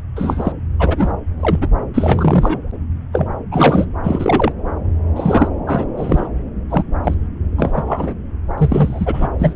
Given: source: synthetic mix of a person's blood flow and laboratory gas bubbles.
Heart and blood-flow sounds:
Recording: Doppler ultrasound of blood flow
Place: subclavian vein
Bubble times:
0.15-0.52 s: bubbles
0.79-1.12 s: bubbles
1.40-1.68 s: bubbles
1.94-2.72 s: bubbles
3.12-3.27 s: bubbles
3.51-3.85 s: bubbles
4.03-4.52 s: bubbles
5.16-5.48 s: bubbles
5.66-5.87 s: bubbles
5.97-6.28 s: bubbles
6.70-6.84 s: bubbles
7.04-7.14 s: bubbles
7.58-7.82 s: bubbles
7.86-8.13 s: bubbles
8.57-9.28 s: bubbles
9.38-9.54 s: bubbles
From the record:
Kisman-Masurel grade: 233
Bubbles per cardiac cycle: several, 3 to 8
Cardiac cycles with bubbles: 50 to 99%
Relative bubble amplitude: loud (0.450 to 0.775)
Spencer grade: 3 (all of the cardiac periods contain showers or single bubble signals, but not dominating or overriding the cardiac motion signals)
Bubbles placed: anywhere in the cardiac cycle

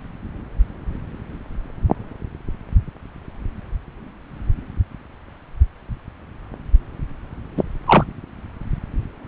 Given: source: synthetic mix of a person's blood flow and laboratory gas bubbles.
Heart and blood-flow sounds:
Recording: Doppler ultrasound of blood flow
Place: subclavian vein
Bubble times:
7.57-7.62 s: bubbles
7.86-8.04 s: bubbles
From the record:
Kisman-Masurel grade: 113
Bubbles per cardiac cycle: 1 to 2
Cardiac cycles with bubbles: 1 to 10%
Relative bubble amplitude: loud (0.450 to 0.775)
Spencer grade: 1 (occasional bubble signal discernible with the cardiac motion signal, with majority of cardiac periods free of bubbles)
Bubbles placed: anywhere in the cardiac cycle

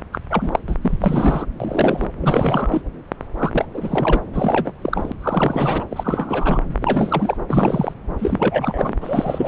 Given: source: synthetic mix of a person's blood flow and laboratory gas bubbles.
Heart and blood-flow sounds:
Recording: Doppler ultrasound of blood flow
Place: subclavian vein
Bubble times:
0.12-0.18 s: bubbles
0.30-0.59 s: bubbles
0.67-0.75 s: bubbles
0.81-1.45 s: bubbles
1.60-2.07 s: bubbles
2.20-2.81 s: bubbles
3.38-3.65 s: bubbles
3.73-4.21 s: bubbles
4.33-4.73 s: bubbles
4.82-5.12 s: bubbles
5.21-5.84 s: bubbles
5.90-6.61 s: bubbles
6.70-6.77 s: bubbles
6.81-7.37 s: bubbles
7.48-7.94 s: bubbles
8.19-8.92 s: bubbles
9.00-9.48 s: bubbles
From the record:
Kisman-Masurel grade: 342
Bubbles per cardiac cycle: rolling drumbeat, 9 or more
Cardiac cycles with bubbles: 100%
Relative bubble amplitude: moderate (0.250 to 0.450)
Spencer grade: 3 (all of the cardiac periods contain showers or single bubble signals, but not dominating or overriding the cardiac motion signals)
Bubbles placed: anywhere in the cardiac cycle

